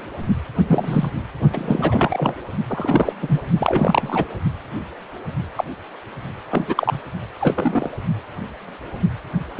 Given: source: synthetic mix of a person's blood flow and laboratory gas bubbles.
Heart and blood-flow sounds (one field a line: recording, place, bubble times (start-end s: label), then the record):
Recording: Doppler ultrasound of blood flow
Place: precordium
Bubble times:
0.67-1.10 s: bubbles
1.52-2.34 s: bubbles
2.69-3.13 s: bubbles
3.21-3.40 s: bubbles
3.57-4.25 s: bubbles
5.57-5.64 s: bubbles
6.51-6.99 s: bubbles
7.41-7.90 s: bubbles
9.55-9.60 s: bubbles
From the record:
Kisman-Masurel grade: 232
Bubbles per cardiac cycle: several, 3 to 8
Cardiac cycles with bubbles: 50 to 99%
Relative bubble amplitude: moderate (0.250 to 0.450)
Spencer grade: 3 (all of the cardiac periods contain showers or single bubble signals, but not dominating or overriding the cardiac motion signals)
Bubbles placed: only in the low amplitude regions of the cardiac cycle